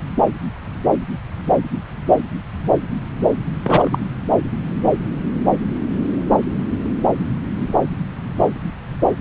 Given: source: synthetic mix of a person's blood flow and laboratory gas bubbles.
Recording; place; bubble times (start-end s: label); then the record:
Doppler ultrasound of blood flow; subclavian vein
3.63-3.98 s: bubbles
From the record:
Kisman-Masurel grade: 213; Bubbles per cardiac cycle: several, 3 to 8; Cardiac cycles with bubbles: 1 to 10%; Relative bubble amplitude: loud (0.450 to 0.775); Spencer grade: 1 (occasional bubble signal discernible with the cardiac motion signal, with majority of cardiac periods free of bubbles); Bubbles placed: anywhere in the cardiac cycle